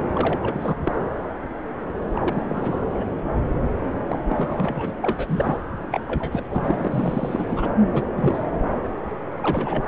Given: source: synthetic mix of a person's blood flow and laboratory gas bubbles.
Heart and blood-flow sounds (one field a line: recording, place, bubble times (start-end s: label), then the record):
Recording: Doppler ultrasound of blood flow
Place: subclavian vein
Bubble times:
0.15-1.04 s: bubbles
2.15-2.85 s: bubbles
2.94-3.04 s: bubbles
4.06-4.19 s: bubbles
4.28-4.92 s: bubbles
5.01-5.58 s: bubbles
5.91-6.01 s: bubbles
6.08-6.44 s: bubbles
6.48-6.88 s: bubbles
6.91-7.70 s: bubbles
7.91-8.04 s: bubbles
8.15-8.47 s: bubbles
9.38-9.88 s: bubbles
From the record:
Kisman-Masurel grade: 332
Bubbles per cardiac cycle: rolling drumbeat, 9 or more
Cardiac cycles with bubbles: 50 to 99%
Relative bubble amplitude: moderate (0.250 to 0.450)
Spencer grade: 3 (all of the cardiac periods contain showers or single bubble signals, but not dominating or overriding the cardiac motion signals)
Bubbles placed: anywhere in the cardiac cycle